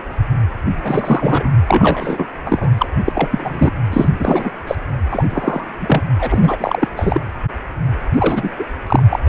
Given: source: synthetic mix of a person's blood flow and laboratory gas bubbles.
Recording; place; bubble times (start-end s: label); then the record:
Doppler ultrasound of blood flow; precordium
0.83-1.50 s: bubbles
1.67-2.26 s: bubbles
2.46-2.70 s: bubbles
2.77-2.87 s: bubbles
3.06-3.71 s: bubbles
3.92-4.09 s: bubbles
4.19-4.51 s: bubbles
4.67-4.75 s: bubbles
5.11-5.26 s: bubbles
5.29-5.64 s: bubbles
5.78-6.01 s: bubbles
6.18-6.88 s: bubbles
6.96-7.20 s: bubbles
8.15-8.50 s: bubbles
8.58-8.65 s: bubbles
8.87-9.03 s: bubbles
9.09-9.19 s: bubbles
9.26-9.29 s: bubbles
From the record:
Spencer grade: 3 (all of the cardiac periods contain showers or single bubble signals, but not dominating or overriding the cardiac motion signals); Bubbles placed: anywhere in the cardiac cycle